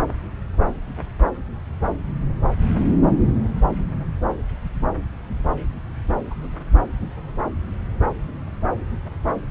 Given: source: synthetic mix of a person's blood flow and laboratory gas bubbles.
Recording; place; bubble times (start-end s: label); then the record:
Doppler ultrasound of blood flow; subclavian vein
6.30-6.34 s: bubbles
6.41-6.47 s: bubbles
From the record:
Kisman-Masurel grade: 111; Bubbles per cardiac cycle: 1 to 2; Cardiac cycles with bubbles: 1 to 10%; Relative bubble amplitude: barely perceptible (0.100 to 0.250); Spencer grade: 1 (occasional bubble signal discernible with the cardiac motion signal, with majority of cardiac periods free of bubbles); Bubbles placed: anywhere in the cardiac cycle